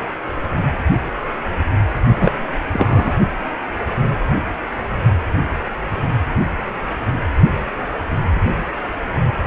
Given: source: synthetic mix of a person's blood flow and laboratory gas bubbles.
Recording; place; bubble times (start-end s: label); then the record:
Doppler ultrasound of blood flow; precordium
2.21-2.32 s: bubbles
2.73-3.14 s: bubbles
From the record:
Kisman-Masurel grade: 213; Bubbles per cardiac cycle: several, 3 to 8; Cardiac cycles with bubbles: 1 to 10%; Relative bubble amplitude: loud (0.450 to 0.775); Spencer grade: 1 (occasional bubble signal discernible with the cardiac motion signal, with majority of cardiac periods free of bubbles); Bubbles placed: only in the low amplitude regions of the cardiac cycle